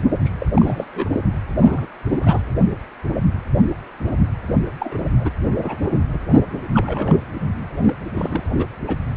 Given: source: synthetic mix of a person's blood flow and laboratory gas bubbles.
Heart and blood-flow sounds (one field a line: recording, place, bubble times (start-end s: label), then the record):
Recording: Doppler ultrasound of blood flow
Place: precordium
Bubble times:
0.00-0.03 s: bubbles
0.24-0.30 s: bubbles
0.39-0.47 s: bubbles
0.54-1.08 s: bubbles
1.13-1.23 s: bubbles
1.60-1.87 s: bubbles
2.11-2.42 s: bubbles
4.46-4.58 s: bubbles
4.80-4.98 s: bubbles
5.20-5.30 s: bubbles
5.62-5.99 s: bubbles
6.74-7.25 s: bubbles
7.76-7.93 s: bubbles
8.15-8.49 s: bubbles
8.58-8.66 s: bubbles
8.87-8.95 s: bubbles
From the record:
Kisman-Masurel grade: 232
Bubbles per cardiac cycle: several, 3 to 8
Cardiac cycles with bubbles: 50 to 99%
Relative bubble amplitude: moderate (0.250 to 0.450)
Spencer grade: 3 (all of the cardiac periods contain showers or single bubble signals, but not dominating or overriding the cardiac motion signals)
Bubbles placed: anywhere in the cardiac cycle